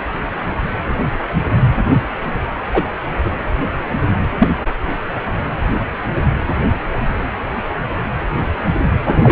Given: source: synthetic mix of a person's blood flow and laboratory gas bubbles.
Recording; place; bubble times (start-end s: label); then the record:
Doppler ultrasound of blood flow; precordium
2.73-2.83 s: bubbles
3.24-3.31 s: bubbles
4.38-4.48 s: bubbles
9.07-9.31 s: bubbles
From the record:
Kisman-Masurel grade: 123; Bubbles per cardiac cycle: 1 to 2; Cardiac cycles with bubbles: 10 to 50%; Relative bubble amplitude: loud (0.450 to 0.775); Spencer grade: 2 (many but less than half of the cardiac periods contain bubble signals, singularly or in groups); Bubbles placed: anywhere in the cardiac cycle